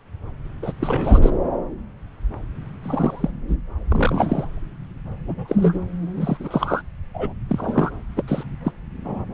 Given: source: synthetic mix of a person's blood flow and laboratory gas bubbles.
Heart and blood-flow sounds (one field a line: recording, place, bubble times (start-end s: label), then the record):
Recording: Doppler ultrasound of blood flow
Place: subclavian vein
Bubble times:
0.62-0.72 s: bubbles
0.80-1.30 s: bubbles
2.83-3.31 s: bubbles
3.47-3.56 s: bubbles
3.88-4.45 s: bubbles
5.25-5.79 s: bubbles
6.17-6.37 s: bubbles
6.40-6.82 s: bubbles
7.13-7.33 s: bubbles
7.49-7.91 s: bubbles
8.16-8.22 s: bubbles
8.27-8.43 s: bubbles
8.64-8.71 s: bubbles
9.04-9.25 s: bubbles
From the record:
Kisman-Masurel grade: 232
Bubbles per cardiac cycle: several, 3 to 8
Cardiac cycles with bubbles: 50 to 99%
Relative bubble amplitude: moderate (0.250 to 0.450)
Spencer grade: 3 (all of the cardiac periods contain showers or single bubble signals, but not dominating or overriding the cardiac motion signals)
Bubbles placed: anywhere in the cardiac cycle